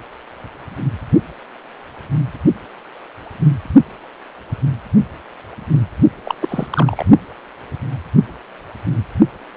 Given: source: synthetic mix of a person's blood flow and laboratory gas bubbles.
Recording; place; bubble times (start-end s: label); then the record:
Doppler ultrasound of blood flow; precordium
6.23-6.34 s: bubbles
6.40-6.67 s: bubbles
6.71-7.05 s: bubbles
From the record:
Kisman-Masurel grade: 212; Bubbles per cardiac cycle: several, 3 to 8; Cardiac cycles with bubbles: 1 to 10%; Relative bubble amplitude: moderate (0.250 to 0.450); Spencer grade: 1 (occasional bubble signal discernible with the cardiac motion signal, with majority of cardiac periods free of bubbles); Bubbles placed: only in the low amplitude regions of the cardiac cycle